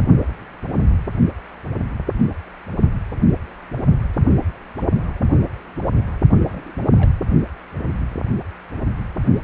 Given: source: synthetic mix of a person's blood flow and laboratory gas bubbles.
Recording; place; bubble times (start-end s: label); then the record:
Doppler ultrasound of blood flow; precordium
6.46-6.71 s: bubbles
6.97-7.11 s: bubbles
From the record:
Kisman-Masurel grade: 211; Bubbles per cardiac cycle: several, 3 to 8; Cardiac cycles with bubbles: 1 to 10%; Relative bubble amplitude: barely perceptible (0.100 to 0.250); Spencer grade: 1 (occasional bubble signal discernible with the cardiac motion signal, with majority of cardiac periods free of bubbles); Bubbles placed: only in the low amplitude regions of the cardiac cycle